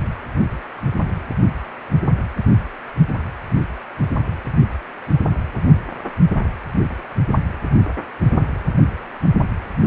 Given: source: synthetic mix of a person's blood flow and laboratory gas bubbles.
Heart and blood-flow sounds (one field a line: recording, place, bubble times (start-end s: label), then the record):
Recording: Doppler ultrasound of blood flow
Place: precordium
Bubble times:
no bubbles
From the record:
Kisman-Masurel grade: 000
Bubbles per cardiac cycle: 0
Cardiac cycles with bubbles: 0%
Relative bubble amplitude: no bubbles discernible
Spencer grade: 0 (complete lack of bubble signals)